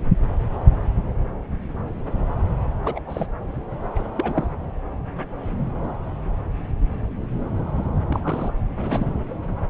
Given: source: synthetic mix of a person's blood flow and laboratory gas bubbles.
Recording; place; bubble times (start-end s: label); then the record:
Doppler ultrasound of blood flow; subclavian vein
2.83-3.02 s: bubbles
3.07-3.26 s: bubbles
3.95-4.04 s: bubbles
4.16-4.48 s: bubbles
8.06-8.54 s: bubbles
8.67-9.11 s: bubbles
From the record:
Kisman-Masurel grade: 221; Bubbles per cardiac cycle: several, 3 to 8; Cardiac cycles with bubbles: 10 to 50%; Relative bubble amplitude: barely perceptible (0.100 to 0.250); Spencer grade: 2 (many but less than half of the cardiac periods contain bubble signals, singularly or in groups); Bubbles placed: anywhere in the cardiac cycle